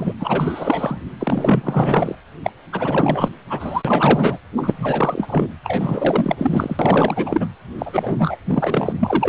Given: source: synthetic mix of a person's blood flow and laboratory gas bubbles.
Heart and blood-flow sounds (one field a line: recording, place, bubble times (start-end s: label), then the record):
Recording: Doppler ultrasound of blood flow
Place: precordium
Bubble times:
0.00-0.13 s: bubbles
0.19-1.00 s: bubbles
1.20-2.16 s: bubbles
2.43-2.50 s: bubbles
2.72-3.30 s: bubbles
3.50-4.38 s: bubbles
4.56-5.47 s: bubbles
5.63-6.36 s: bubbles
6.38-7.49 s: bubbles
7.78-8.38 s: bubbles
8.45-8.93 s: bubbles
9.00-9.29 s: bubbles
From the record:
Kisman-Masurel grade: 444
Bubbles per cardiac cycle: continuous sound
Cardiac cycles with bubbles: 100%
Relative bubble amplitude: maximal (0.775 to 0.999)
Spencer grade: 4 (maximum detectable bubble signal sounding continuously throughout systole and diastole of every cardiac period, and overriding the amplitude of the normal cardiac signals)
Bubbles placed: anywhere in the cardiac cycle